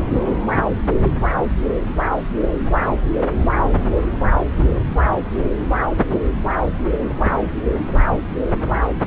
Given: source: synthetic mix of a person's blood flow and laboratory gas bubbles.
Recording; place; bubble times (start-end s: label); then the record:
Doppler ultrasound of blood flow; subclavian vein
no bubbles
From the record:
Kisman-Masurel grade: 000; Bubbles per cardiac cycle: 0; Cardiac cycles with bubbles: 0%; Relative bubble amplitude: no bubbles discernible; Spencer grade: 0 (complete lack of bubble signals)